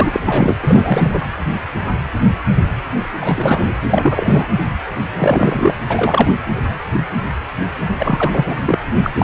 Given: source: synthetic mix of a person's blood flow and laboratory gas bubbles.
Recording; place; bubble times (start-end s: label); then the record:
Doppler ultrasound of blood flow; precordium
0.00-0.56 s: bubbles
0.61-1.24 s: bubbles
3.21-3.68 s: bubbles
3.90-4.49 s: bubbles
5.18-5.73 s: bubbles
5.87-6.31 s: bubbles
7.98-8.81 s: bubbles
9.03-9.11 s: bubbles
9.18-9.24 s: bubbles
From the record:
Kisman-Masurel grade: 333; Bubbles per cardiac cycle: rolling drumbeat, 9 or more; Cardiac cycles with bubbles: 50 to 99%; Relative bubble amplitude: loud (0.450 to 0.775); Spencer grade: 3 (all of the cardiac periods contain showers or single bubble signals, but not dominating or overriding the cardiac motion signals); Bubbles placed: anywhere in the cardiac cycle